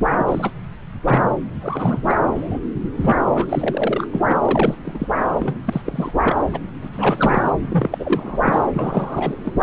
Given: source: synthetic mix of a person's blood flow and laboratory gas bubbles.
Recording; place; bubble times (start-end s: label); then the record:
Doppler ultrasound of blood flow; subclavian vein
0.18-0.51 s: bubbles
1.07-1.23 s: bubbles
1.61-2.01 s: bubbles
2.06-2.18 s: bubbles
2.35-2.60 s: bubbles
3.01-3.46 s: bubbles
3.49-4.07 s: bubbles
4.11-4.19 s: bubbles
4.29-4.38 s: bubbles
4.42-5.08 s: bubbles
5.39-5.60 s: bubbles
5.65-5.82 s: bubbles
5.84-6.19 s: bubbles
6.23-6.37 s: bubbles
6.53-6.59 s: bubbles
6.83-7.52 s: bubbles
7.70-8.67 s: bubbles
8.73-9.36 s: bubbles
9.44-9.52 s: bubbles
9.59-9.63 s: bubbles
From the record:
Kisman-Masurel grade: 342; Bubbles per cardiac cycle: rolling drumbeat, 9 or more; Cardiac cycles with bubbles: 100%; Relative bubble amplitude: moderate (0.250 to 0.450); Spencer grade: 3 (all of the cardiac periods contain showers or single bubble signals, but not dominating or overriding the cardiac motion signals); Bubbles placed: anywhere in the cardiac cycle